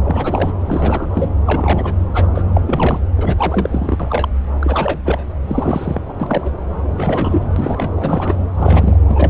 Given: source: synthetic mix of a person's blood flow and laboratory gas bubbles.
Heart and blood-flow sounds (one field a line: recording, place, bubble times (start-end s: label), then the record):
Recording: Doppler ultrasound of blood flow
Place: subclavian vein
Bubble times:
0.03-0.52 s: bubbles
0.66-1.30 s: bubbles
1.45-1.94 s: bubbles
2.14-2.27 s: bubbles
2.35-2.42 s: bubbles
2.54-3.00 s: bubbles
3.17-4.29 s: bubbles
4.59-5.00 s: bubbles
5.05-5.24 s: bubbles
5.47-6.01 s: bubbles
6.08-6.13 s: bubbles
6.20-6.56 s: bubbles
6.96-7.46 s: bubbles
7.56-7.93 s: bubbles
7.97-8.35 s: bubbles
8.56-9.00 s: bubbles
9.08-9.30 s: bubbles
From the record:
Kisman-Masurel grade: 342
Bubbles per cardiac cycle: rolling drumbeat, 9 or more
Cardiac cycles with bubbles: 100%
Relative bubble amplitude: moderate (0.250 to 0.450)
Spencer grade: 3 (all of the cardiac periods contain showers or single bubble signals, but not dominating or overriding the cardiac motion signals)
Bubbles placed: anywhere in the cardiac cycle